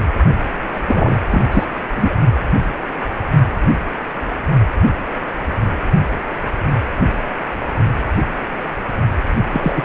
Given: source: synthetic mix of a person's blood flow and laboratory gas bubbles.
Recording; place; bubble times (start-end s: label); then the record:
Doppler ultrasound of blood flow; precordium
0.74-0.80 s: bubbles
0.86-1.17 s: bubbles
1.29-1.42 s: bubbles
1.51-1.65 s: bubbles
1.95-2.15 s: bubbles
9.53-9.83 s: bubbles
From the record:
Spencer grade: 2 (many but less than half of the cardiac periods contain bubble signals, singularly or in groups); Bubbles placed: only in the low amplitude regions of the cardiac cycle